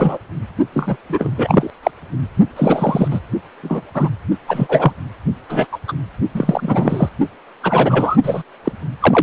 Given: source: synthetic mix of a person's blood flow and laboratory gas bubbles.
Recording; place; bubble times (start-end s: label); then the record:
Doppler ultrasound of blood flow; precordium
0.00-0.18 s: bubbles
0.74-0.96 s: bubbles
1.08-1.70 s: bubbles
1.83-1.91 s: bubbles
2.56-3.08 s: bubbles
3.10-3.19 s: bubbles
3.63-3.81 s: bubbles
3.94-4.08 s: bubbles
4.47-4.92 s: bubbles
5.49-5.67 s: bubbles
5.72-5.78 s: bubbles
5.88-5.93 s: bubbles
6.35-7.09 s: bubbles
7.62-8.18 s: bubbles
8.23-8.43 s: bubbles
8.64-8.72 s: bubbles
9.00-9.23 s: bubbles
From the record:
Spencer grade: 3 (all of the cardiac periods contain showers or single bubble signals, but not dominating or overriding the cardiac motion signals); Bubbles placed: only in the low amplitude regions of the cardiac cycle